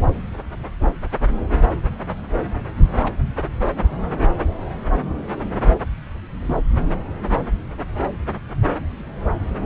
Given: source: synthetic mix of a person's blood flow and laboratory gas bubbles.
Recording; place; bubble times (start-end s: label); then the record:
Doppler ultrasound of blood flow; subclavian vein
3.02-3.16 s: bubbles
3.76-3.88 s: bubbles
4.01-4.17 s: bubbles
6.40-6.58 s: bubbles
From the record:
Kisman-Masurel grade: 121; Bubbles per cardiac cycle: 1 to 2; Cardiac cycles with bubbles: 10 to 50%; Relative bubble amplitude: barely perceptible (0.100 to 0.250); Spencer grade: 2 (many but less than half of the cardiac periods contain bubble signals, singularly or in groups); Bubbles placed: anywhere in the cardiac cycle